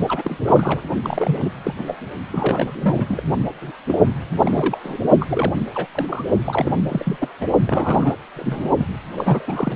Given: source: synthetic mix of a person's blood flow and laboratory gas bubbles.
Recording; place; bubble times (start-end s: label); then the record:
Doppler ultrasound of blood flow; precordium
0.08-0.38 s: bubbles
0.46-0.81 s: bubbles
1.04-1.52 s: bubbles
1.64-1.74 s: bubbles
1.78-1.94 s: bubbles
2.32-2.67 s: bubbles
2.73-3.23 s: bubbles
3.61-3.71 s: bubbles
3.88-3.98 s: bubbles
4.38-4.80 s: bubbles
4.83-5.00 s: bubbles
5.20-5.53 s: bubbles
5.58-5.67 s: bubbles
5.74-5.86 s: bubbles
5.94-6.24 s: bubbles
6.44-6.72 s: bubbles
6.88-7.28 s: bubbles
7.40-7.47 s: bubbles
7.67-8.14 s: bubbles
8.36-8.68 s: bubbles
8.78-8.87 s: bubbles
9.16-9.76 s: bubbles
From the record:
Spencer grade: 3 (all of the cardiac periods contain showers or single bubble signals, but not dominating or overriding the cardiac motion signals); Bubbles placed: only in the low amplitude regions of the cardiac cycle